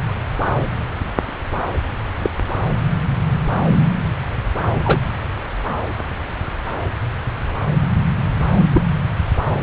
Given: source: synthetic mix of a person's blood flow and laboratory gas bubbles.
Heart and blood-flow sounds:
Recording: Doppler ultrasound of blood flow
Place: subclavian vein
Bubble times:
2.19-2.30 s: bubbles
4.83-5.10 s: bubbles
8.73-8.82 s: bubbles
From the record:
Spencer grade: 2 (many but less than half of the cardiac periods contain bubble signals, singularly or in groups)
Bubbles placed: anywhere in the cardiac cycle

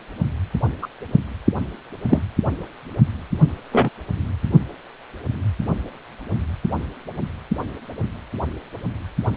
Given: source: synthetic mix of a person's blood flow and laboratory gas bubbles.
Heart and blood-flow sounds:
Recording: Doppler ultrasound of blood flow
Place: precordium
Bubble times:
0.81-0.87 s: bubbles
2.08-2.22 s: bubbles
3.71-3.89 s: bubbles
From the record:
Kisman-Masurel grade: 123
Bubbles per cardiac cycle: 1 to 2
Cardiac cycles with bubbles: 10 to 50%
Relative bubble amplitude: loud (0.450 to 0.775)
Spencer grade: 2 (many but less than half of the cardiac periods contain bubble signals, singularly or in groups)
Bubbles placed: anywhere in the cardiac cycle

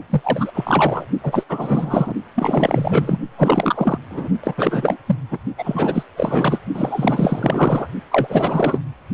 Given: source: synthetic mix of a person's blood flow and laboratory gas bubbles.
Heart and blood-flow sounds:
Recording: Doppler ultrasound of blood flow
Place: precordium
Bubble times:
0.10-1.06 s: bubbles
1.22-1.44 s: bubbles
1.48-2.13 s: bubbles
2.35-3.19 s: bubbles
3.38-3.98 s: bubbles
4.11-4.30 s: bubbles
4.43-4.55 s: bubbles
4.57-4.97 s: bubbles
5.06-5.15 s: bubbles
5.31-5.39 s: bubbles
5.58-6.03 s: bubbles
6.17-6.59 s: bubbles
6.74-7.87 s: bubbles
8.12-8.80 s: bubbles
From the record:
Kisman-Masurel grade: 444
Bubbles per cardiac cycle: continuous sound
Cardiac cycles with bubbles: 100%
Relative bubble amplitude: maximal (0.775 to 0.999)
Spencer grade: 4 (maximum detectable bubble signal sounding continuously throughout systole and diastole of every cardiac period, and overriding the amplitude of the normal cardiac signals)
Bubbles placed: only in the low amplitude regions of the cardiac cycle

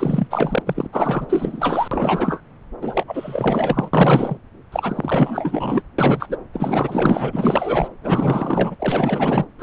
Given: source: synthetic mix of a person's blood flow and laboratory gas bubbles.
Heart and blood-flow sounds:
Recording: Doppler ultrasound of blood flow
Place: subclavian vein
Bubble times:
0.00-0.27 s: bubbles
0.30-0.62 s: bubbles
0.67-0.87 s: bubbles
0.92-1.27 s: bubbles
1.29-1.88 s: bubbles
1.91-2.41 s: bubbles
2.81-3.04 s: bubbles
3.07-3.91 s: bubbles
3.93-4.38 s: bubbles
4.72-5.83 s: bubbles
5.98-6.37 s: bubbles
6.53-7.89 s: bubbles
8.02-8.75 s: bubbles
8.79-9.46 s: bubbles
9.59-9.63 s: bubbles
From the record:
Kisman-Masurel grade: 444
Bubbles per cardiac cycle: continuous sound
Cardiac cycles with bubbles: 100%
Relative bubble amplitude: maximal (0.775 to 0.999)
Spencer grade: 4 (maximum detectable bubble signal sounding continuously throughout systole and diastole of every cardiac period, and overriding the amplitude of the normal cardiac signals)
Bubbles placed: anywhere in the cardiac cycle

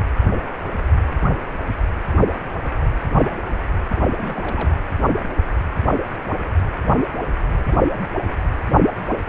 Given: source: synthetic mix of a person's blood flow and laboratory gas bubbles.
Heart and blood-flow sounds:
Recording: Doppler ultrasound of blood flow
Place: precordium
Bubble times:
4.18-4.75 s: bubbles
From the record:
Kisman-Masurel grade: 211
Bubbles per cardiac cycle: several, 3 to 8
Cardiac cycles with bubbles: 1 to 10%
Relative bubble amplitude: barely perceptible (0.100 to 0.250)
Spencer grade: 1 (occasional bubble signal discernible with the cardiac motion signal, with majority of cardiac periods free of bubbles)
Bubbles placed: anywhere in the cardiac cycle

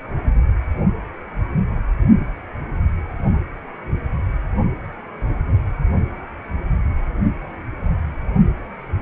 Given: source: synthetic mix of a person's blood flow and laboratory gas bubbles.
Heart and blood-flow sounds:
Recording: Doppler ultrasound of blood flow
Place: precordium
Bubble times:
no bubbles
From the record:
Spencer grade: 0 (complete lack of bubble signals)

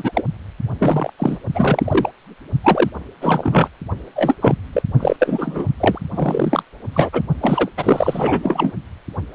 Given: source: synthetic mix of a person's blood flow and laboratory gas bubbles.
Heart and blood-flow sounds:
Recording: Doppler ultrasound of blood flow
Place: precordium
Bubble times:
0.00-0.23 s: bubbles
0.79-1.10 s: bubbles
1.19-1.38 s: bubbles
1.54-2.11 s: bubbles
2.63-2.90 s: bubbles
3.21-3.68 s: bubbles
4.16-4.35 s: bubbles
4.41-4.55 s: bubbles
4.73-4.83 s: bubbles
5.00-5.16 s: bubbles
5.19-5.66 s: bubbles
5.80-5.98 s: bubbles
6.14-6.62 s: bubbles
6.93-7.10 s: bubbles
7.12-7.21 s: bubbles
7.40-7.68 s: bubbles
7.77-8.73 s: bubbles
From the record:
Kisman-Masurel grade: 333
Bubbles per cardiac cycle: rolling drumbeat, 9 or more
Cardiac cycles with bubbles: 50 to 99%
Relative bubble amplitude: loud (0.450 to 0.775)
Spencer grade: 3 (all of the cardiac periods contain showers or single bubble signals, but not dominating or overriding the cardiac motion signals)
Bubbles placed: only in the low amplitude regions of the cardiac cycle

